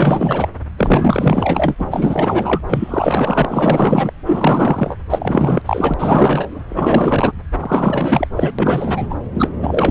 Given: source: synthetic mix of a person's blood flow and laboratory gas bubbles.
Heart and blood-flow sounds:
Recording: Doppler ultrasound of blood flow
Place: subclavian vein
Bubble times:
0.00-0.49 s: bubbles
0.77-1.75 s: bubbles
1.80-2.60 s: bubbles
2.68-4.12 s: bubbles
4.25-4.96 s: bubbles
5.10-5.62 s: bubbles
5.66-5.94 s: bubbles
5.99-6.61 s: bubbles
6.70-7.32 s: bubbles
7.59-8.27 s: bubbles
8.35-8.52 s: bubbles
8.58-9.15 s: bubbles
9.33-9.49 s: bubbles
9.59-9.91 s: bubbles
From the record:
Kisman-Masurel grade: 444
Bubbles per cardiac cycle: continuous sound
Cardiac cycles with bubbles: 100%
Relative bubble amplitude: maximal (0.775 to 0.999)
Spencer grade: 4 (maximum detectable bubble signal sounding continuously throughout systole and diastole of every cardiac period, and overriding the amplitude of the normal cardiac signals)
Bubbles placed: anywhere in the cardiac cycle

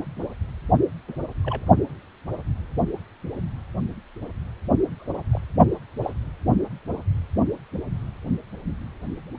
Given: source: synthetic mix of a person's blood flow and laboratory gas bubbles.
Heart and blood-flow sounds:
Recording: Doppler ultrasound of blood flow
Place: precordium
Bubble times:
1.08-1.16 s: bubbles
1.44-1.64 s: bubbles
5.00-5.21 s: bubbles
5.30-5.41 s: bubbles
6.03-6.14 s: bubbles
From the record:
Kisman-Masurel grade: 121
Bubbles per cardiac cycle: 1 to 2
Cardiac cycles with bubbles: 10 to 50%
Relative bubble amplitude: barely perceptible (0.100 to 0.250)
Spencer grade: 2 (many but less than half of the cardiac periods contain bubble signals, singularly or in groups)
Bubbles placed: only in the low amplitude regions of the cardiac cycle

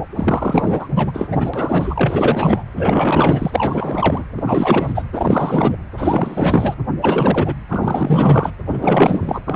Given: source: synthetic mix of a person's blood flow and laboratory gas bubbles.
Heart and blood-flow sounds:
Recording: Doppler ultrasound of blood flow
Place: precordium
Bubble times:
0.15-0.88 s: bubbles
0.94-1.11 s: bubbles
1.14-1.50 s: bubbles
1.53-2.62 s: bubbles
2.76-4.23 s: bubbles
4.37-4.92 s: bubbles
4.94-5.04 s: bubbles
5.12-5.78 s: bubbles
5.97-6.75 s: bubbles
7.01-7.54 s: bubbles
7.69-8.51 s: bubbles
8.68-9.42 s: bubbles
9.46-9.56 s: bubbles
From the record:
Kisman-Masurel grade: 444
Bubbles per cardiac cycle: continuous sound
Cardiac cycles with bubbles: 100%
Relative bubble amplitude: maximal (0.775 to 0.999)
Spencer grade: 4 (maximum detectable bubble signal sounding continuously throughout systole and diastole of every cardiac period, and overriding the amplitude of the normal cardiac signals)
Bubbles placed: anywhere in the cardiac cycle

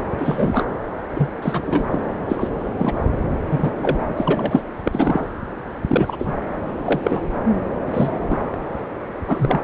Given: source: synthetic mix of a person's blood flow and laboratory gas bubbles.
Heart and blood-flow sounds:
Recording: Doppler ultrasound of blood flow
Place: subclavian vein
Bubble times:
0.00-0.04 s: bubbles
0.18-0.65 s: bubbles
1.13-1.29 s: bubbles
1.42-1.88 s: bubbles
1.90-2.06 s: bubbles
2.29-2.48 s: bubbles
2.79-3.07 s: bubbles
3.50-3.72 s: bubbles
3.81-4.14 s: bubbles
4.17-4.62 s: bubbles
4.84-5.25 s: bubbles
5.88-6.33 s: bubbles
6.86-7.32 s: bubbles
7.92-8.18 s: bubbles
8.29-8.38 s: bubbles
9.25-9.63 s: bubbles
From the record:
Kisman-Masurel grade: 233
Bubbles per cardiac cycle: several, 3 to 8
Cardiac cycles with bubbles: 50 to 99%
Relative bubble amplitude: loud (0.450 to 0.775)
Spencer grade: 3 (all of the cardiac periods contain showers or single bubble signals, but not dominating or overriding the cardiac motion signals)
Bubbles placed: anywhere in the cardiac cycle

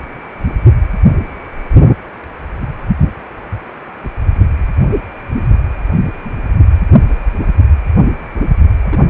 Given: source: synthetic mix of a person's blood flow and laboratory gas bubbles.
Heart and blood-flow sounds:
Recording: Doppler ultrasound of blood flow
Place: precordium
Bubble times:
8.81-8.99 s: bubbles
From the record:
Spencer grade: 1 (occasional bubble signal discernible with the cardiac motion signal, with majority of cardiac periods free of bubbles)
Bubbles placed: anywhere in the cardiac cycle

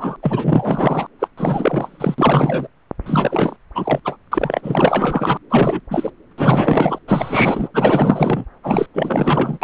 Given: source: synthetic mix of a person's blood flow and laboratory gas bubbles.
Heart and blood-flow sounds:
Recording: Doppler ultrasound of blood flow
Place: subclavian vein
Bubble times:
0.00-0.16 s: bubbles
0.22-1.06 s: bubbles
1.19-1.27 s: bubbles
1.37-2.15 s: bubbles
2.18-2.67 s: bubbles
3.06-3.56 s: bubbles
3.75-4.00 s: bubbles
4.04-4.17 s: bubbles
4.31-5.38 s: bubbles
5.50-5.80 s: bubbles
5.90-6.10 s: bubbles
6.31-6.33 s: bubbles
6.38-6.99 s: bubbles
7.08-7.68 s: bubbles
7.74-8.45 s: bubbles
8.63-8.87 s: bubbles
8.94-9.59 s: bubbles
9.62-9.64 s: bubbles
From the record:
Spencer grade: 4 (maximum detectable bubble signal sounding continuously throughout systole and diastole of every cardiac period, and overriding the amplitude of the normal cardiac signals)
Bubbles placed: anywhere in the cardiac cycle

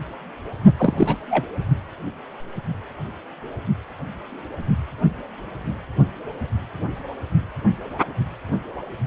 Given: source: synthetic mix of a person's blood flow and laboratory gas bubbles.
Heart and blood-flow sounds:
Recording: Doppler ultrasound of blood flow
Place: precordium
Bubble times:
0.77-1.17 s: bubbles
1.30-1.46 s: bubbles
From the record:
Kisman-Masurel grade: 212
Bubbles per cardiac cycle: several, 3 to 8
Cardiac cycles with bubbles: 1 to 10%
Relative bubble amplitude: moderate (0.250 to 0.450)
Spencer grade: 1 (occasional bubble signal discernible with the cardiac motion signal, with majority of cardiac periods free of bubbles)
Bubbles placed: only in the low amplitude regions of the cardiac cycle

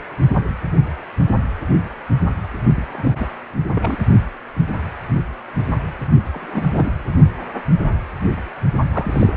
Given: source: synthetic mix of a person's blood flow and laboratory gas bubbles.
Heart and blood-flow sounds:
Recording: Doppler ultrasound of blood flow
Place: precordium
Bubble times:
2.75-2.82 s: bubbles
2.87-3.28 s: bubbles
3.75-3.98 s: bubbles
6.33-6.70 s: bubbles
6.73-6.92 s: bubbles
8.92-9.33 s: bubbles
From the record:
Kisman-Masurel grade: 222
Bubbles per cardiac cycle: several, 3 to 8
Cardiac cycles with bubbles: 10 to 50%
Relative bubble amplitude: moderate (0.250 to 0.450)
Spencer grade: 2 (many but less than half of the cardiac periods contain bubble signals, singularly or in groups)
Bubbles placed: only in the low amplitude regions of the cardiac cycle

